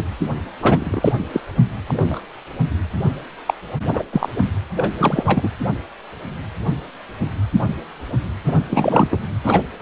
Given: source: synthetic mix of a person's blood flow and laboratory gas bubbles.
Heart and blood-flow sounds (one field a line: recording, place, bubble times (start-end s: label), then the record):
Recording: Doppler ultrasound of blood flow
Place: precordium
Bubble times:
0.00-0.05 s: bubbles
0.61-1.12 s: bubbles
1.32-1.41 s: bubbles
1.88-2.20 s: bubbles
3.46-3.54 s: bubbles
3.89-4.03 s: bubbles
4.12-4.29 s: bubbles
4.77-4.94 s: bubbles
4.99-5.50 s: bubbles
8.44-8.63 s: bubbles
8.70-9.20 s: bubbles
9.43-9.62 s: bubbles
9.79-9.82 s: bubbles
From the record:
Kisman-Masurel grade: 333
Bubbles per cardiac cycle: rolling drumbeat, 9 or more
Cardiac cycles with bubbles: 50 to 99%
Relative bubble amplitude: loud (0.450 to 0.775)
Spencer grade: 3 (all of the cardiac periods contain showers or single bubble signals, but not dominating or overriding the cardiac motion signals)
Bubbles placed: anywhere in the cardiac cycle